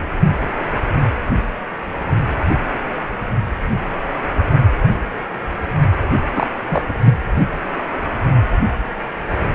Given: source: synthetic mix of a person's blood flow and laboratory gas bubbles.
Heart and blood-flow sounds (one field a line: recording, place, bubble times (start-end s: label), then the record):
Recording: Doppler ultrasound of blood flow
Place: precordium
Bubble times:
6.34-6.47 s: bubbles
6.62-6.98 s: bubbles
7.02-7.13 s: bubbles
From the record:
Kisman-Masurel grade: 212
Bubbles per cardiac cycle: several, 3 to 8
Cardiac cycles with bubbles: 1 to 10%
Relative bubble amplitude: moderate (0.250 to 0.450)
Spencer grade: 1 (occasional bubble signal discernible with the cardiac motion signal, with majority of cardiac periods free of bubbles)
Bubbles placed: anywhere in the cardiac cycle